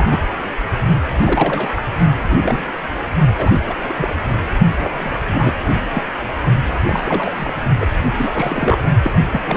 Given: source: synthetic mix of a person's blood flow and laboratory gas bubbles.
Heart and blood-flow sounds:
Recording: Doppler ultrasound of blood flow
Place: precordium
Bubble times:
0.00-0.27 s: bubbles
1.18-1.71 s: bubbles
1.76-1.82 s: bubbles
2.30-2.37 s: bubbles
2.43-2.71 s: bubbles
3.34-3.50 s: bubbles
3.57-3.78 s: bubbles
3.82-3.93 s: bubbles
3.97-4.13 s: bubbles
4.78-5.13 s: bubbles
5.27-5.56 s: bubbles
5.93-6.03 s: bubbles
6.87-7.53 s: bubbles
7.80-7.87 s: bubbles
8.12-8.78 s: bubbles
9.02-9.12 s: bubbles
9.16-9.26 s: bubbles
9.30-9.40 s: bubbles
9.46-9.57 s: bubbles
From the record:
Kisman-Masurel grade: 242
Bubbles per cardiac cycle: several, 3 to 8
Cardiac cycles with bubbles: 100%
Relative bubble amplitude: moderate (0.250 to 0.450)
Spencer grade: 3 (all of the cardiac periods contain showers or single bubble signals, but not dominating or overriding the cardiac motion signals)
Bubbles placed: only in the low amplitude regions of the cardiac cycle

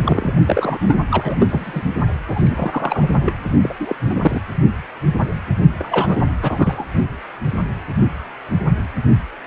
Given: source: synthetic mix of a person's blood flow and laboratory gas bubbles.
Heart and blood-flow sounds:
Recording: Doppler ultrasound of blood flow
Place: precordium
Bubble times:
0.00-0.33 s: bubbles
0.46-0.78 s: bubbles
0.88-0.98 s: bubbles
1.10-1.83 s: bubbles
2.27-3.08 s: bubbles
3.23-3.36 s: bubbles
3.62-3.74 s: bubbles
3.79-3.95 s: bubbles
4.04-4.42 s: bubbles
5.78-6.19 s: bubbles
6.42-6.86 s: bubbles
From the record:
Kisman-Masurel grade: 232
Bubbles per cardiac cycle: several, 3 to 8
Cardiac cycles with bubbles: 50 to 99%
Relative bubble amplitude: moderate (0.250 to 0.450)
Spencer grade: 3 (all of the cardiac periods contain showers or single bubble signals, but not dominating or overriding the cardiac motion signals)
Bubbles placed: only in the low amplitude regions of the cardiac cycle

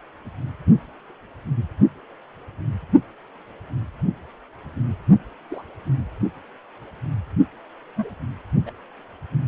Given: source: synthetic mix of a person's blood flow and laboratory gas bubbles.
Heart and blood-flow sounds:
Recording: Doppler ultrasound of blood flow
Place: precordium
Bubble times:
5.50-5.62 s: bubbles
7.96-8.10 s: bubbles
8.66-8.71 s: bubbles
From the record:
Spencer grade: 2 (many but less than half of the cardiac periods contain bubble signals, singularly or in groups)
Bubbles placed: only in the low amplitude regions of the cardiac cycle

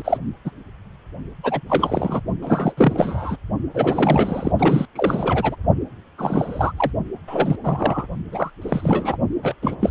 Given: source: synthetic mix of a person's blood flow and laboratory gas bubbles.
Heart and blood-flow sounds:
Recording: Doppler ultrasound of blood flow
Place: precordium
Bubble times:
0.00-0.18 s: bubbles
0.45-0.51 s: bubbles
1.43-1.61 s: bubbles
1.69-2.21 s: bubbles
2.41-2.75 s: bubbles
2.77-3.36 s: bubbles
3.74-4.52 s: bubbles
4.59-4.86 s: bubbles
4.95-5.56 s: bubbles
6.18-6.72 s: bubbles
6.77-6.92 s: bubbles
7.28-7.56 s: bubbles
7.64-8.08 s: bubbles
8.31-8.50 s: bubbles
8.62-9.17 s: bubbles
9.43-9.54 s: bubbles
9.62-9.75 s: bubbles
9.81-9.90 s: bubbles
From the record:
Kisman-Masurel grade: 332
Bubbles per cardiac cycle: rolling drumbeat, 9 or more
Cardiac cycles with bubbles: 50 to 99%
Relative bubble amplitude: moderate (0.250 to 0.450)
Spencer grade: 3 (all of the cardiac periods contain showers or single bubble signals, but not dominating or overriding the cardiac motion signals)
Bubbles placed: only in the low amplitude regions of the cardiac cycle

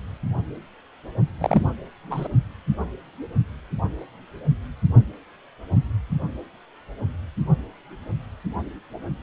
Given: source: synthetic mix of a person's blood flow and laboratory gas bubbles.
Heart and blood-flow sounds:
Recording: Doppler ultrasound of blood flow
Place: precordium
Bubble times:
1.41-1.67 s: bubbles
2.10-2.27 s: bubbles
From the record:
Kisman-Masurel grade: 112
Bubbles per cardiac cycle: 1 to 2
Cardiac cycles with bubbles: 1 to 10%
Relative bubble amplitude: moderate (0.250 to 0.450)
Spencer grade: 1 (occasional bubble signal discernible with the cardiac motion signal, with majority of cardiac periods free of bubbles)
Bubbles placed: only in the low amplitude regions of the cardiac cycle

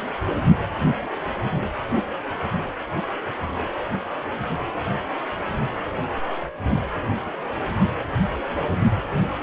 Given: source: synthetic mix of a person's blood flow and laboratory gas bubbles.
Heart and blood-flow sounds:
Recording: Doppler ultrasound of blood flow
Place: precordium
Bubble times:
no bubbles
From the record:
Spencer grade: 0 (complete lack of bubble signals)

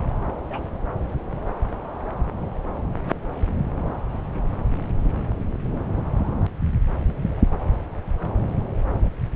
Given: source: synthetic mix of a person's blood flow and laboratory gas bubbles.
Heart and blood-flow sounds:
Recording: Doppler ultrasound of blood flow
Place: subclavian vein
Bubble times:
0.49-0.64 s: bubbles
From the record:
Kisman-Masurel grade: 111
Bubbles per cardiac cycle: 1 to 2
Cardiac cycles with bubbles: 1 to 10%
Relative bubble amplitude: barely perceptible (0.100 to 0.250)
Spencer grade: 1 (occasional bubble signal discernible with the cardiac motion signal, with majority of cardiac periods free of bubbles)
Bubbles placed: anywhere in the cardiac cycle

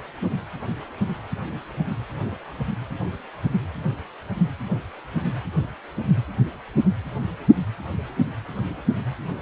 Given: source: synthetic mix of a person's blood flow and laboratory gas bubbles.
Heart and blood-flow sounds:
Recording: Doppler ultrasound of blood flow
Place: precordium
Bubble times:
no bubbles
From the record:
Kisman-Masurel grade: 000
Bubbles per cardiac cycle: 0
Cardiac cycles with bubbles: 0%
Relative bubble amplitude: no bubbles discernible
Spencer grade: 0 (complete lack of bubble signals)

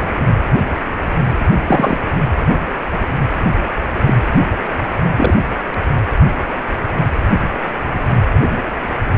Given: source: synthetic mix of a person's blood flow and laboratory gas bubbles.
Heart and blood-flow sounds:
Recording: Doppler ultrasound of blood flow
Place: precordium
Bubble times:
1.65-1.96 s: bubbles
4.04-4.15 s: bubbles
5.16-5.37 s: bubbles
From the record:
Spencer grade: 2 (many but less than half of the cardiac periods contain bubble signals, singularly or in groups)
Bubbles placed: anywhere in the cardiac cycle

